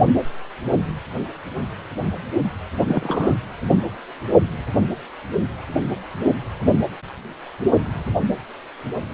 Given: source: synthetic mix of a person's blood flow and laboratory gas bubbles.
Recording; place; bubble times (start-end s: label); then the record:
Doppler ultrasound of blood flow; precordium
2.88-3.34 s: bubbles
From the record:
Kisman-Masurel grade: 112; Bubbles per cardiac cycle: 1 to 2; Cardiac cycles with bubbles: 1 to 10%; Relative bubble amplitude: moderate (0.250 to 0.450); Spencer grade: 1 (occasional bubble signal discernible with the cardiac motion signal, with majority of cardiac periods free of bubbles); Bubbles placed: only in the low amplitude regions of the cardiac cycle